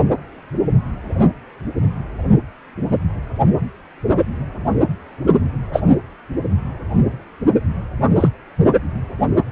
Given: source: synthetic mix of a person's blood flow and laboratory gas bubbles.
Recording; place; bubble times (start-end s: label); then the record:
Doppler ultrasound of blood flow; precordium
5.73-5.83 s: bubbles
8.15-8.30 s: bubbles
From the record:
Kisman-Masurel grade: 123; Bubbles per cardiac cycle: 1 to 2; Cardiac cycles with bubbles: 10 to 50%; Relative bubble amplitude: loud (0.450 to 0.775); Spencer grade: 2 (many but less than half of the cardiac periods contain bubble signals, singularly or in groups); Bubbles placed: only in the low amplitude regions of the cardiac cycle